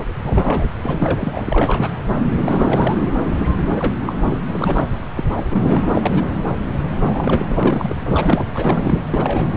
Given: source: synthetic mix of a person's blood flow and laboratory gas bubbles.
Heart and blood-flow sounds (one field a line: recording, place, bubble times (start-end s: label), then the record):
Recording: Doppler ultrasound of blood flow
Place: subclavian vein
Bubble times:
0.21-0.68 s: bubbles
0.82-1.90 s: bubbles
2.46-2.98 s: bubbles
3.74-3.92 s: bubbles
4.01-4.38 s: bubbles
4.47-4.88 s: bubbles
5.13-5.24 s: bubbles
5.35-5.60 s: bubbles
5.63-6.25 s: bubbles
7.01-7.45 s: bubbles
7.48-7.96 s: bubbles
8.01-8.45 s: bubbles
8.52-9.00 s: bubbles
9.10-9.47 s: bubbles
From the record:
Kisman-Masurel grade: 332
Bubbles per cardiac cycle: rolling drumbeat, 9 or more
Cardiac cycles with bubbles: 50 to 99%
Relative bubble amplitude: moderate (0.250 to 0.450)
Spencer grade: 3 (all of the cardiac periods contain showers or single bubble signals, but not dominating or overriding the cardiac motion signals)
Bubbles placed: anywhere in the cardiac cycle